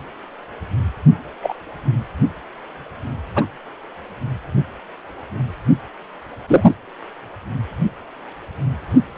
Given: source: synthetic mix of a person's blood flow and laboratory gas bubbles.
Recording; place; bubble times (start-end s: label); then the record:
Doppler ultrasound of blood flow; precordium
1.42-1.54 s: bubbles
3.35-3.45 s: bubbles
6.48-6.75 s: bubbles
9.14-9.18 s: bubbles
From the record:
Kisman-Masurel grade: 123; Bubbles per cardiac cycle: 1 to 2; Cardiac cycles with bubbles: 10 to 50%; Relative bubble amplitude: loud (0.450 to 0.775); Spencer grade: 2 (many but less than half of the cardiac periods contain bubble signals, singularly or in groups); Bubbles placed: only in the low amplitude regions of the cardiac cycle